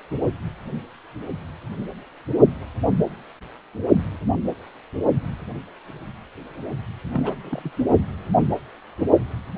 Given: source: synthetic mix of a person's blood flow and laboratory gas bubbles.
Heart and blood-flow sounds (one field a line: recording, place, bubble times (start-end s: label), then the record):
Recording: Doppler ultrasound of blood flow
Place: precordium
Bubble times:
7.12-7.35 s: bubbles
7.42-7.71 s: bubbles
From the record:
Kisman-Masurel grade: 211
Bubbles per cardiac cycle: several, 3 to 8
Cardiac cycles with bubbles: 1 to 10%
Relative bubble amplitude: barely perceptible (0.100 to 0.250)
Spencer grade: 1 (occasional bubble signal discernible with the cardiac motion signal, with majority of cardiac periods free of bubbles)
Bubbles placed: only in the low amplitude regions of the cardiac cycle